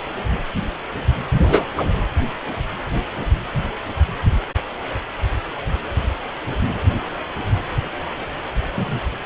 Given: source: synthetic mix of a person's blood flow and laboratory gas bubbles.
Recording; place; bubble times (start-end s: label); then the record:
Doppler ultrasound of blood flow; precordium
1.39-1.65 s: bubbles
1.77-1.85 s: bubbles
8.77-8.99 s: bubbles
From the record:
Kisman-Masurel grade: 123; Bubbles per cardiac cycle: 1 to 2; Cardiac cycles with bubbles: 10 to 50%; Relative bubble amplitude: loud (0.450 to 0.775); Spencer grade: 2 (many but less than half of the cardiac periods contain bubble signals, singularly or in groups); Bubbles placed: anywhere in the cardiac cycle